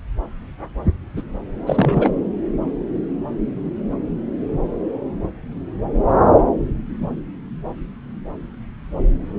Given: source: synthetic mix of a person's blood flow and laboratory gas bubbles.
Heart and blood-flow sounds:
Doppler ultrasound of blood flow; subclavian vein
1.16-1.23 s: bubbles
1.67-2.10 s: bubbles
From the record:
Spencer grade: 1 (occasional bubble signal discernible with the cardiac motion signal, with majority of cardiac periods free of bubbles); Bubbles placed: anywhere in the cardiac cycle

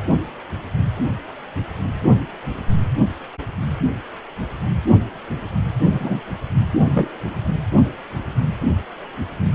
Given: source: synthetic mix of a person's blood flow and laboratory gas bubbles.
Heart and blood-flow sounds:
Doppler ultrasound of blood flow; precordium
5.83-6.21 s: bubbles
6.95-7.10 s: bubbles
From the record:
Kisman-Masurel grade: 123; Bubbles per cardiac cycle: 1 to 2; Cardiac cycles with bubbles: 10 to 50%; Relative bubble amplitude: loud (0.450 to 0.775); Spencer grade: 2 (many but less than half of the cardiac periods contain bubble signals, singularly or in groups); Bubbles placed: anywhere in the cardiac cycle

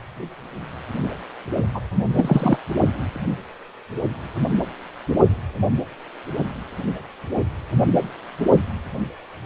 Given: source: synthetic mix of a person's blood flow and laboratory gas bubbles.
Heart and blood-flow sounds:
Doppler ultrasound of blood flow; precordium
1.74-1.80 s: bubbles
2.12-2.59 s: bubbles
From the record:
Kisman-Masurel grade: 212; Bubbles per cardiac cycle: several, 3 to 8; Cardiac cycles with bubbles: 1 to 10%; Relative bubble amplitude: moderate (0.250 to 0.450); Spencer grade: 1 (occasional bubble signal discernible with the cardiac motion signal, with majority of cardiac periods free of bubbles); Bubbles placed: only in the low amplitude regions of the cardiac cycle

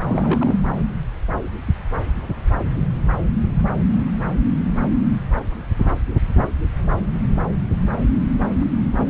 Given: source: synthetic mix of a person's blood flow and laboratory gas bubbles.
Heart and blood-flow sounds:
Doppler ultrasound of blood flow; subclavian vein
0.02-0.57 s: bubbles
From the record:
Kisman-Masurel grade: 211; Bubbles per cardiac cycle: several, 3 to 8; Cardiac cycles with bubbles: 1 to 10%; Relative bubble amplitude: barely perceptible (0.100 to 0.250); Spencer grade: 1 (occasional bubble signal discernible with the cardiac motion signal, with majority of cardiac periods free of bubbles); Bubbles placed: anywhere in the cardiac cycle

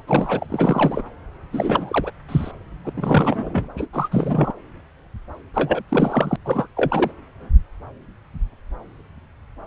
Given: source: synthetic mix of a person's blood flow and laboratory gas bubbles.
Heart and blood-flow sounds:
Doppler ultrasound of blood flow; subclavian vein
0.00-0.02 s: bubbles
0.07-0.46 s: bubbles
0.50-1.02 s: bubbles
1.53-2.11 s: bubbles
2.28-2.51 s: bubbles
2.84-2.92 s: bubbles
2.96-3.67 s: bubbles
3.76-3.88 s: bubbles
3.93-4.08 s: bubbles
4.12-4.53 s: bubbles
5.54-5.83 s: bubbles
5.88-6.36 s: bubbles
6.45-6.67 s: bubbles
6.76-7.12 s: bubbles
From the record:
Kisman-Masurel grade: 333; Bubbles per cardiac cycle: rolling drumbeat, 9 or more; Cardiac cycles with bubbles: 50 to 99%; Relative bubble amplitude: loud (0.450 to 0.775); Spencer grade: 3 (all of the cardiac periods contain showers or single bubble signals, but not dominating or overriding the cardiac motion signals); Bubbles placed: anywhere in the cardiac cycle

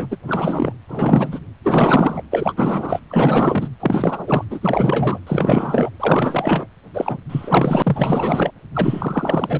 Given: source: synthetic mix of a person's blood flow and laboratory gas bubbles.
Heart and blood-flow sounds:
Doppler ultrasound of blood flow; precordium
0.00-0.07 s: bubbles
0.10-0.17 s: bubbles
0.27-0.73 s: bubbles
0.88-1.40 s: bubbles
1.64-2.23 s: bubbles
2.31-3.02 s: bubbles
3.09-3.69 s: bubbles
3.80-4.45 s: bubbles
4.50-5.20 s: bubbles
5.27-5.90 s: bubbles
6.00-6.67 s: bubbles
6.94-7.24 s: bubbles
7.29-8.51 s: bubbles
8.75-9.60 s: bubbles
From the record:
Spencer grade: 4 (maximum detectable bubble signal sounding continuously throughout systole and diastole of every cardiac period, and overriding the amplitude of the normal cardiac signals); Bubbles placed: anywhere in the cardiac cycle

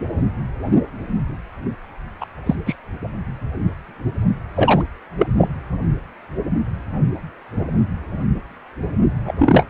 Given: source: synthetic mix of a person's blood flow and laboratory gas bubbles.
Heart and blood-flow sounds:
Doppler ultrasound of blood flow; precordium
2.20-2.26 s: bubbles
2.46-2.55 s: bubbles
2.66-2.76 s: bubbles
4.55-4.83 s: bubbles
5.18-5.26 s: bubbles
5.37-5.48 s: bubbles
9.27-9.33 s: bubbles
9.39-9.66 s: bubbles
From the record:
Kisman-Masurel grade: 223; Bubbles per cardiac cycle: several, 3 to 8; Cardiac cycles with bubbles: 10 to 50%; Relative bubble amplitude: loud (0.450 to 0.775); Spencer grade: 2 (many but less than half of the cardiac periods contain bubble signals, singularly or in groups); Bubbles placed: anywhere in the cardiac cycle

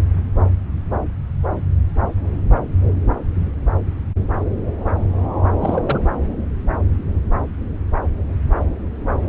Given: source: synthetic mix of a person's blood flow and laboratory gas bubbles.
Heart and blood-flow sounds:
Doppler ultrasound of blood flow; subclavian vein
5.61-5.82 s: bubbles
5.86-6.02 s: bubbles
From the record:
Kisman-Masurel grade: 212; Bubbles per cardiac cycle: several, 3 to 8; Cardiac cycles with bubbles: 1 to 10%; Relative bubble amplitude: moderate (0.250 to 0.450); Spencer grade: 1 (occasional bubble signal discernible with the cardiac motion signal, with majority of cardiac periods free of bubbles); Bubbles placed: anywhere in the cardiac cycle

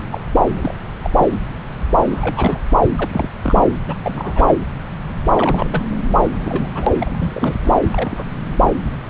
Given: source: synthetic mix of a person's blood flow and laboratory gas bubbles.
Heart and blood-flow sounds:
Doppler ultrasound of blood flow; subclavian vein
0.11-0.21 s: bubbles
0.53-0.75 s: bubbles
1.03-1.10 s: bubbles
1.18-1.27 s: bubbles
2.10-2.58 s: bubbles
2.96-3.29 s: bubbles
3.43-3.63 s: bubbles
3.88-3.94 s: bubbles
4.04-4.54 s: bubbles
5.30-5.83 s: bubbles
6.23-6.29 s: bubbles
6.43-6.71 s: bubbles
6.75-6.88 s: bubbles
7.00-7.55 s: bubbles
7.64-7.75 s: bubbles
7.92-8.24 s: bubbles
From the record:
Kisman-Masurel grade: 232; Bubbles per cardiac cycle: several, 3 to 8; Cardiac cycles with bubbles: 50 to 99%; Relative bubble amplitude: moderate (0.250 to 0.450); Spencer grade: 3 (all of the cardiac periods contain showers or single bubble signals, but not dominating or overriding the cardiac motion signals); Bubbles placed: anywhere in the cardiac cycle

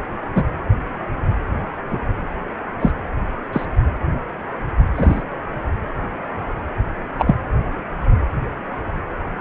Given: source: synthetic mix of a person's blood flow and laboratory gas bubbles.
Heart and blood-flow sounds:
Doppler ultrasound of blood flow; precordium
0.35-0.45 s: bubbles
1.90-1.98 s: bubbles
2.79-2.92 s: bubbles
3.52-3.66 s: bubbles
4.96-5.22 s: bubbles
7.18-7.35 s: bubbles
From the record:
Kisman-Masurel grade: 123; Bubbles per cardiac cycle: 1 to 2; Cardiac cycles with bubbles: 10 to 50%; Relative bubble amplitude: loud (0.450 to 0.775); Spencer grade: 2 (many but less than half of the cardiac periods contain bubble signals, singularly or in groups); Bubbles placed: anywhere in the cardiac cycle

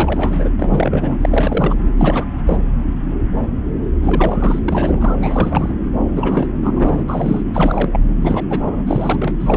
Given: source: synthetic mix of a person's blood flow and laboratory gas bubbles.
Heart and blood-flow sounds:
Doppler ultrasound of blood flow; subclavian vein
0.00-0.48 s: bubbles
0.59-1.17 s: bubbles
1.21-1.75 s: bubbles
1.97-2.25 s: bubbles
2.46-2.58 s: bubbles
4.03-4.62 s: bubbles
4.67-5.16 s: bubbles
5.21-5.74 s: bubbles
6.16-7.05 s: bubbles
7.08-7.42 s: bubbles
7.54-7.89 s: bubbles
7.92-8.00 s: bubbles
8.21-8.46 s: bubbles
8.49-8.84 s: bubbles
8.87-9.34 s: bubbles
9.40-9.57 s: bubbles
From the record:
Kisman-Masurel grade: 332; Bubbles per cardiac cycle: rolling drumbeat, 9 or more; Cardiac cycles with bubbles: 50 to 99%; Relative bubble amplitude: moderate (0.250 to 0.450); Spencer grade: 3 (all of the cardiac periods contain showers or single bubble signals, but not dominating or overriding the cardiac motion signals); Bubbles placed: anywhere in the cardiac cycle

